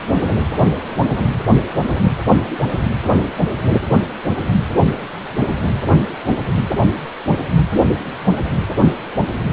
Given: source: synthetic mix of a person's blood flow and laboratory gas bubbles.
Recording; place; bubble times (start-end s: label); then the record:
Doppler ultrasound of blood flow; precordium
no bubbles
From the record:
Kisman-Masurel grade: 000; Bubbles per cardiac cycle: 0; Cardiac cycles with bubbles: 0%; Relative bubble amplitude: no bubbles discernible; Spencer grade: 0 (complete lack of bubble signals)